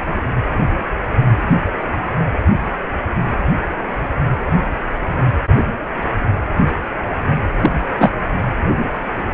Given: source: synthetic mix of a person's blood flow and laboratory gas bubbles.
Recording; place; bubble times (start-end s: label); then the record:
Doppler ultrasound of blood flow; precordium
7.61-7.71 s: bubbles
8.00-8.10 s: bubbles
From the record:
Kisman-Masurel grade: 213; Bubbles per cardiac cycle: several, 3 to 8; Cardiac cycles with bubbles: 1 to 10%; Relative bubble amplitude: loud (0.450 to 0.775); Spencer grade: 1 (occasional bubble signal discernible with the cardiac motion signal, with majority of cardiac periods free of bubbles); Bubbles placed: anywhere in the cardiac cycle